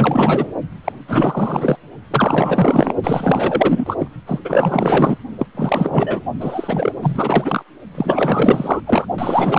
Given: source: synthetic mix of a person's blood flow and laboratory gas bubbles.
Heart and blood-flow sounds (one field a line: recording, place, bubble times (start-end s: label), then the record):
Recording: Doppler ultrasound of blood flow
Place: precordium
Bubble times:
0.00-0.48 s: bubbles
0.84-0.92 s: bubbles
1.08-1.77 s: bubbles
2.10-2.94 s: bubbles
3.03-3.96 s: bubbles
3.99-4.08 s: bubbles
4.26-4.40 s: bubbles
4.45-5.17 s: bubbles
5.38-5.46 s: bubbles
5.54-6.22 s: bubbles
6.40-6.92 s: bubbles
7.01-7.63 s: bubbles
7.95-8.80 s: bubbles
8.87-9.06 s: bubbles
9.18-9.59 s: bubbles
From the record:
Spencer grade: 4 (maximum detectable bubble signal sounding continuously throughout systole and diastole of every cardiac period, and overriding the amplitude of the normal cardiac signals)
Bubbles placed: only in the low amplitude regions of the cardiac cycle